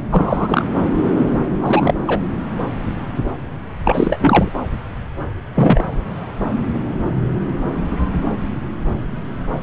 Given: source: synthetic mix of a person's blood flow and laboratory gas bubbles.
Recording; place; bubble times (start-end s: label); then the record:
Doppler ultrasound of blood flow; subclavian vein
0.11-0.65 s: bubbles
1.61-1.94 s: bubbles
2.06-2.21 s: bubbles
3.84-4.51 s: bubbles
5.54-6.01 s: bubbles
From the record:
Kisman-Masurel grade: 223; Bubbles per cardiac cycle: several, 3 to 8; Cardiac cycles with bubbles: 10 to 50%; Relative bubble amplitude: loud (0.450 to 0.775); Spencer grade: 2 (many but less than half of the cardiac periods contain bubble signals, singularly or in groups); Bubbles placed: anywhere in the cardiac cycle